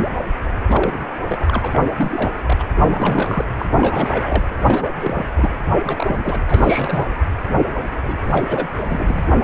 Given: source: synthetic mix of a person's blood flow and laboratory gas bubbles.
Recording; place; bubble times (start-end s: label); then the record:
Doppler ultrasound of blood flow; precordium
0.68-1.17 s: bubbles
1.28-1.82 s: bubbles
1.84-1.90 s: bubbles
1.97-2.41 s: bubbles
2.46-2.63 s: bubbles
2.78-3.45 s: bubbles
3.59-3.66 s: bubbles
3.71-4.47 s: bubbles
4.58-4.92 s: bubbles
5.02-5.25 s: bubbles
5.35-5.52 s: bubbles
5.87-6.43 s: bubbles
6.48-7.08 s: bubbles
8.02-8.67 s: bubbles
8.74-9.30 s: bubbles
From the record:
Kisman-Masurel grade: 342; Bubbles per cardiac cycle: rolling drumbeat, 9 or more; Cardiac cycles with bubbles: 100%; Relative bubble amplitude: moderate (0.250 to 0.450); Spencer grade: 3 (all of the cardiac periods contain showers or single bubble signals, but not dominating or overriding the cardiac motion signals); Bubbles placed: anywhere in the cardiac cycle